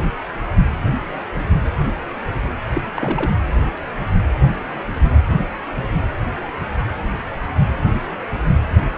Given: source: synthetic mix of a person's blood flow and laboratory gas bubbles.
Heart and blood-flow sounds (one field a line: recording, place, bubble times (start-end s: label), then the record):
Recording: Doppler ultrasound of blood flow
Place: precordium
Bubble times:
2.75-2.81 s: bubbles
2.94-3.31 s: bubbles
From the record:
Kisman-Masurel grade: 222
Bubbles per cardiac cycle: several, 3 to 8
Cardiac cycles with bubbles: 10 to 50%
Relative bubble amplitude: moderate (0.250 to 0.450)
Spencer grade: 2 (many but less than half of the cardiac periods contain bubble signals, singularly or in groups)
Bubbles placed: anywhere in the cardiac cycle